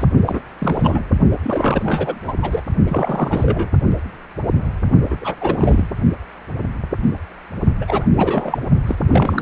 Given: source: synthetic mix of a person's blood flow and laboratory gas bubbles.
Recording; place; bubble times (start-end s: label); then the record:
Doppler ultrasound of blood flow; precordium
0.00-0.06 s: bubbles
0.24-0.40 s: bubbles
0.58-1.03 s: bubbles
1.31-1.36 s: bubbles
1.44-2.33 s: bubbles
2.41-2.62 s: bubbles
2.88-3.69 s: bubbles
5.09-5.18 s: bubbles
5.21-5.35 s: bubbles
5.41-5.86 s: bubbles
7.81-8.06 s: bubbles
8.16-8.58 s: bubbles
8.87-8.96 s: bubbles
9.06-9.42 s: bubbles
From the record:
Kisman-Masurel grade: 332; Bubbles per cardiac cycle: rolling drumbeat, 9 or more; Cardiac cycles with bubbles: 50 to 99%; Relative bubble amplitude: moderate (0.250 to 0.450); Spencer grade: 3 (all of the cardiac periods contain showers or single bubble signals, but not dominating or overriding the cardiac motion signals); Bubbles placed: only in the low amplitude regions of the cardiac cycle